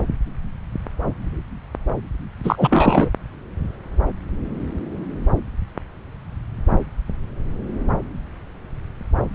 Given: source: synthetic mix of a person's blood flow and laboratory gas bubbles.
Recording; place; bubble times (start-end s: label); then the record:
Doppler ultrasound of blood flow; subclavian vein
2.44-3.10 s: bubbles
From the record:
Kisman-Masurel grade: 223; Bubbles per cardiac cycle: several, 3 to 8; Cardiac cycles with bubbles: 10 to 50%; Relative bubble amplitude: loud (0.450 to 0.775); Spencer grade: 2 (many but less than half of the cardiac periods contain bubble signals, singularly or in groups); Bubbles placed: anywhere in the cardiac cycle